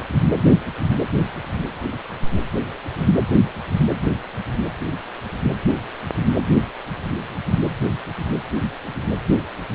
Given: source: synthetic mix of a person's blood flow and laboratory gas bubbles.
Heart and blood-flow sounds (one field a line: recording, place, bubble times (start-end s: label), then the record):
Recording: Doppler ultrasound of blood flow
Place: precordium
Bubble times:
no bubbles
From the record:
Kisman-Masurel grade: 000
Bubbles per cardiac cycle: 0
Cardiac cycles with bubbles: 0%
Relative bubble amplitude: no bubbles discernible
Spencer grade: 0 (complete lack of bubble signals)